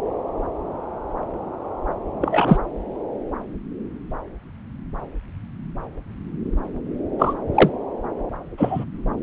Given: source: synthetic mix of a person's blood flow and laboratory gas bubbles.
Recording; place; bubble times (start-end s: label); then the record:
Doppler ultrasound of blood flow; subclavian vein
2.21-2.58 s: bubbles
7.18-7.33 s: bubbles
7.54-7.70 s: bubbles
8.57-8.84 s: bubbles
From the record:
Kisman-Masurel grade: 123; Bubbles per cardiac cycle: 1 to 2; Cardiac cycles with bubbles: 10 to 50%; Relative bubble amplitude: loud (0.450 to 0.775); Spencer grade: 2 (many but less than half of the cardiac periods contain bubble signals, singularly or in groups); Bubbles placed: anywhere in the cardiac cycle